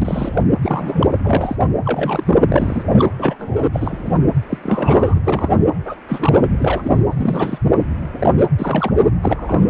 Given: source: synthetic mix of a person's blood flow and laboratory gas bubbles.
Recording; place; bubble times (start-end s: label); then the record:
Doppler ultrasound of blood flow; precordium
0.00-0.46 s: bubbles
0.61-1.07 s: bubbles
1.24-1.56 s: bubbles
1.85-2.40 s: bubbles
2.48-2.87 s: bubbles
2.90-3.10 s: bubbles
3.19-3.36 s: bubbles
3.39-3.64 s: bubbles
3.73-4.20 s: bubbles
4.50-4.58 s: bubbles
4.62-5.20 s: bubbles
5.24-5.67 s: bubbles
5.85-5.96 s: bubbles
6.08-6.40 s: bubbles
6.50-7.01 s: bubbles
7.10-7.58 s: bubbles
7.79-7.84 s: bubbles
8.18-8.34 s: bubbles
8.38-8.46 s: bubbles
8.58-8.91 s: bubbles
9.21-9.69 s: bubbles
From the record:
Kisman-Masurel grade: 242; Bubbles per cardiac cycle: several, 3 to 8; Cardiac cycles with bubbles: 100%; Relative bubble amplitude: moderate (0.250 to 0.450); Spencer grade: 3 (all of the cardiac periods contain showers or single bubble signals, but not dominating or overriding the cardiac motion signals); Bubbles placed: anywhere in the cardiac cycle